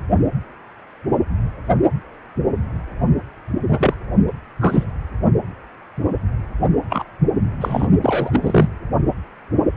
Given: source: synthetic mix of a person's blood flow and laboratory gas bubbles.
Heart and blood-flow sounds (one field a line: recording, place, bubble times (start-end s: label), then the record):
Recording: Doppler ultrasound of blood flow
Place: precordium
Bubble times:
3.68-3.95 s: bubbles
4.27-4.33 s: bubbles
4.60-4.86 s: bubbles
6.89-7.04 s: bubbles
7.61-7.88 s: bubbles
8.01-8.68 s: bubbles
From the record:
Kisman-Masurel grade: 233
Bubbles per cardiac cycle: several, 3 to 8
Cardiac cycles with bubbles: 50 to 99%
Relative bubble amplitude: loud (0.450 to 0.775)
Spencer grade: 3 (all of the cardiac periods contain showers or single bubble signals, but not dominating or overriding the cardiac motion signals)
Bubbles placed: only in the low amplitude regions of the cardiac cycle